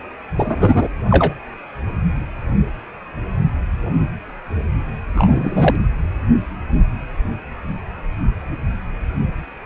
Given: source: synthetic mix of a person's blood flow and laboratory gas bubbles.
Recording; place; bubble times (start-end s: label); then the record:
Doppler ultrasound of blood flow; precordium
0.36-0.89 s: bubbles
1.10-1.33 s: bubbles
5.16-5.75 s: bubbles
From the record:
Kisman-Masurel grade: 123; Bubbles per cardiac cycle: 1 to 2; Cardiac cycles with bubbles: 10 to 50%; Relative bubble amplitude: loud (0.450 to 0.775); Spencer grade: 2 (many but less than half of the cardiac periods contain bubble signals, singularly or in groups); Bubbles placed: anywhere in the cardiac cycle